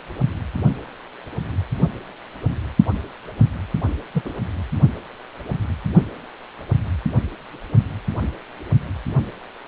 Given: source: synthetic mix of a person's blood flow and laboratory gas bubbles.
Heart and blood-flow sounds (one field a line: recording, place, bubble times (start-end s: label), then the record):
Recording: Doppler ultrasound of blood flow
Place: precordium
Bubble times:
4.14-4.33 s: bubbles
From the record:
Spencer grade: 1 (occasional bubble signal discernible with the cardiac motion signal, with majority of cardiac periods free of bubbles)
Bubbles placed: only in the low amplitude regions of the cardiac cycle